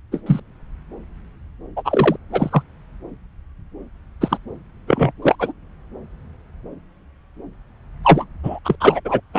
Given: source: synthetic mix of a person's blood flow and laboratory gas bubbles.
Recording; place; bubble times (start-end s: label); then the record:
Doppler ultrasound of blood flow; subclavian vein
0.12-0.21 s: bubbles
0.26-0.40 s: bubbles
1.76-1.82 s: bubbles
1.84-2.17 s: bubbles
2.32-2.62 s: bubbles
4.21-4.38 s: bubbles
4.87-5.11 s: bubbles
5.22-5.35 s: bubbles
5.38-5.52 s: bubbles
8.04-8.24 s: bubbles
8.43-8.59 s: bubbles
8.64-8.75 s: bubbles
8.80-9.00 s: bubbles
9.04-9.20 s: bubbles
9.33-9.39 s: bubbles
From the record:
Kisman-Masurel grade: 233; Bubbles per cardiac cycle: several, 3 to 8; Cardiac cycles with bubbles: 50 to 99%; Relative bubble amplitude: loud (0.450 to 0.775); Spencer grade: 3 (all of the cardiac periods contain showers or single bubble signals, but not dominating or overriding the cardiac motion signals); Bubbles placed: anywhere in the cardiac cycle